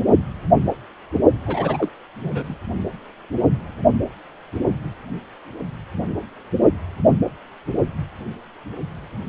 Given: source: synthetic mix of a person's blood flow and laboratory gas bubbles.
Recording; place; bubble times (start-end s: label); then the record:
Doppler ultrasound of blood flow; precordium
1.46-1.89 s: bubbles
2.23-2.54 s: bubbles
From the record:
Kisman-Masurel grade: 212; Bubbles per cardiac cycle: several, 3 to 8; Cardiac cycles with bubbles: 1 to 10%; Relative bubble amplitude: moderate (0.250 to 0.450); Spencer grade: 1 (occasional bubble signal discernible with the cardiac motion signal, with majority of cardiac periods free of bubbles); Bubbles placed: only in the low amplitude regions of the cardiac cycle